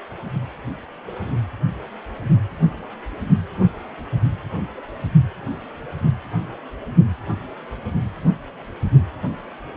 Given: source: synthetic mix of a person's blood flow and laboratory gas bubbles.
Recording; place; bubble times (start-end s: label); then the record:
Doppler ultrasound of blood flow; precordium
no bubbles
From the record:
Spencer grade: 0 (complete lack of bubble signals)